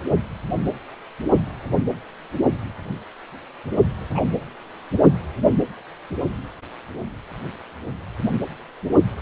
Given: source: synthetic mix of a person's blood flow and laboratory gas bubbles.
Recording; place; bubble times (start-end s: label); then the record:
Doppler ultrasound of blood flow; precordium
4.15-4.22 s: bubbles
From the record:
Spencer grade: 1 (occasional bubble signal discernible with the cardiac motion signal, with majority of cardiac periods free of bubbles); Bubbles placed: only in the low amplitude regions of the cardiac cycle